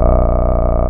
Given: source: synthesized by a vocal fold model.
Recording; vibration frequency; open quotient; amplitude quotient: sustained vowel; 30 Hz; 0.5; 1